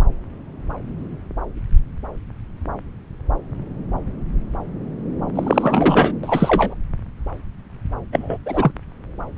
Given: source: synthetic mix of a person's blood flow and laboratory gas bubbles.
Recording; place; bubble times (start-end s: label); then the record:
Doppler ultrasound of blood flow; subclavian vein
5.35-6.13 s: bubbles
6.23-6.75 s: bubbles
8.12-8.38 s: bubbles
8.46-8.71 s: bubbles
From the record:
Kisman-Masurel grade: 223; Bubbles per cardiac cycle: several, 3 to 8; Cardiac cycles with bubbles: 10 to 50%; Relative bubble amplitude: loud (0.450 to 0.775); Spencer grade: 2 (many but less than half of the cardiac periods contain bubble signals, singularly or in groups); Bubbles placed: anywhere in the cardiac cycle